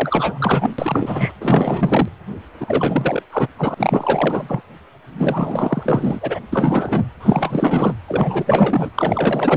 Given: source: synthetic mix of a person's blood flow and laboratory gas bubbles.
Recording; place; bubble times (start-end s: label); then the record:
Doppler ultrasound of blood flow; precordium
0.00-0.74 s: bubbles
0.78-1.33 s: bubbles
1.40-2.08 s: bubbles
2.60-3.23 s: bubbles
3.32-3.48 s: bubbles
3.57-3.74 s: bubbles
3.77-4.62 s: bubbles
5.19-6.40 s: bubbles
6.52-7.06 s: bubbles
7.20-7.94 s: bubbles
8.08-8.90 s: bubbles
8.95-9.57 s: bubbles
From the record:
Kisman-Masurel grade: 444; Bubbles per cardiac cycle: continuous sound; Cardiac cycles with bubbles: 100%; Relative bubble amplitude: maximal (0.775 to 0.999); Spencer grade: 4 (maximum detectable bubble signal sounding continuously throughout systole and diastole of every cardiac period, and overriding the amplitude of the normal cardiac signals); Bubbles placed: anywhere in the cardiac cycle